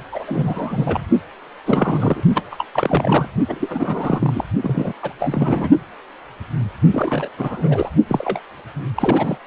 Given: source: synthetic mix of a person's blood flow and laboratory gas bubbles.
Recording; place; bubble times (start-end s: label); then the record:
Doppler ultrasound of blood flow; precordium
0.11-1.06 s: bubbles
1.65-2.23 s: bubbles
2.34-2.43 s: bubbles
2.51-2.65 s: bubbles
2.74-3.28 s: bubbles
3.48-4.44 s: bubbles
4.62-4.93 s: bubbles
5.02-5.13 s: bubbles
5.19-5.70 s: bubbles
6.92-7.29 s: bubbles
7.38-7.90 s: bubbles
8.08-8.40 s: bubbles
8.95-9.38 s: bubbles
From the record:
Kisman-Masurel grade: 332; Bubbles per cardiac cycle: rolling drumbeat, 9 or more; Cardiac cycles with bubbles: 50 to 99%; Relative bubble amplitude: moderate (0.250 to 0.450); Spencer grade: 3 (all of the cardiac periods contain showers or single bubble signals, but not dominating or overriding the cardiac motion signals); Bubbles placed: only in the low amplitude regions of the cardiac cycle